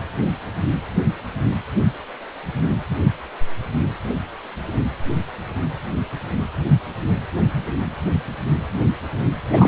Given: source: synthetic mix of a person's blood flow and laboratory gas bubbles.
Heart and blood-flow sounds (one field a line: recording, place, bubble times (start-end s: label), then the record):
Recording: Doppler ultrasound of blood flow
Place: precordium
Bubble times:
9.49-9.67 s: bubbles
From the record:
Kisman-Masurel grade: 213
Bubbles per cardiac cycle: several, 3 to 8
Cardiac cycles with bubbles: 1 to 10%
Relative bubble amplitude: loud (0.450 to 0.775)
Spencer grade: 1 (occasional bubble signal discernible with the cardiac motion signal, with majority of cardiac periods free of bubbles)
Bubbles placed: anywhere in the cardiac cycle